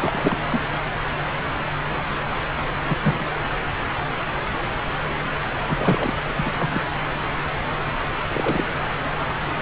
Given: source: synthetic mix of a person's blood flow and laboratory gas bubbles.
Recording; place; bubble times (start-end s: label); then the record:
Doppler ultrasound of blood flow; subclavian vein
0.00-0.38 s: bubbles
0.50-0.62 s: bubbles
2.87-2.97 s: bubbles
3.02-3.23 s: bubbles
5.67-6.23 s: bubbles
6.35-6.51 s: bubbles
6.59-6.82 s: bubbles
8.33-8.65 s: bubbles
From the record:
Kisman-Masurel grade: 221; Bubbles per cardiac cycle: several, 3 to 8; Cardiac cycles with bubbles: 10 to 50%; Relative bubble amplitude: barely perceptible (0.100 to 0.250); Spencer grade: 2 (many but less than half of the cardiac periods contain bubble signals, singularly or in groups); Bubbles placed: anywhere in the cardiac cycle